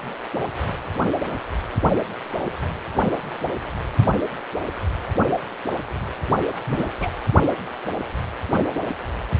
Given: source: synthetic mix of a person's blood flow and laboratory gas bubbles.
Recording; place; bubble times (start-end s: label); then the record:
Doppler ultrasound of blood flow; precordium
6.67-6.85 s: bubbles
7.00-7.10 s: bubbles
From the record:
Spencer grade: 1 (occasional bubble signal discernible with the cardiac motion signal, with majority of cardiac periods free of bubbles); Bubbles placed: anywhere in the cardiac cycle